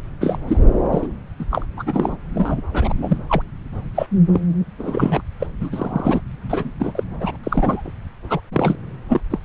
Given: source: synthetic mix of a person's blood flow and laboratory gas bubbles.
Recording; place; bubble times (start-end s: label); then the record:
Doppler ultrasound of blood flow; subclavian vein
0.21-0.39 s: bubbles
0.47-0.57 s: bubbles
0.93-1.07 s: bubbles
1.39-1.45 s: bubbles
1.50-1.66 s: bubbles
1.76-2.16 s: bubbles
2.34-2.61 s: bubbles
2.73-2.94 s: bubbles
3.02-3.17 s: bubbles
3.29-3.42 s: bubbles
3.94-4.07 s: bubbles
4.33-4.40 s: bubbles
4.79-5.22 s: bubbles
5.40-5.47 s: bubbles
5.60-6.21 s: bubbles
6.50-6.71 s: bubbles
6.79-6.92 s: bubbles
6.95-7.04 s: bubbles
7.20-7.37 s: bubbles
7.44-7.92 s: bubbles
8.29-8.40 s: bubbles
8.53-8.75 s: bubbles
9.09-9.21 s: bubbles
9.30-9.39 s: bubbles
From the record:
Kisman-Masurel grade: 242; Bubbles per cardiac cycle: several, 3 to 8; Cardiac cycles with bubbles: 100%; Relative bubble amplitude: moderate (0.250 to 0.450); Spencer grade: 3 (all of the cardiac periods contain showers or single bubble signals, but not dominating or overriding the cardiac motion signals); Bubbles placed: anywhere in the cardiac cycle